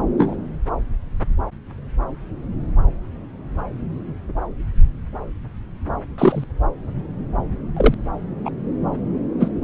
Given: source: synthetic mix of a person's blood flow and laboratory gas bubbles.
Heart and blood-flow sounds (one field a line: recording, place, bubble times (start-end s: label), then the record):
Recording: Doppler ultrasound of blood flow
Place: subclavian vein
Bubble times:
0.17-0.35 s: bubbles
6.18-6.44 s: bubbles
7.76-7.95 s: bubbles
8.45-8.50 s: bubbles
9.39-9.51 s: bubbles
From the record:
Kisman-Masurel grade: 123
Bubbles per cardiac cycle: 1 to 2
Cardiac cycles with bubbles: 10 to 50%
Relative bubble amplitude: loud (0.450 to 0.775)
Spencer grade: 2 (many but less than half of the cardiac periods contain bubble signals, singularly or in groups)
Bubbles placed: anywhere in the cardiac cycle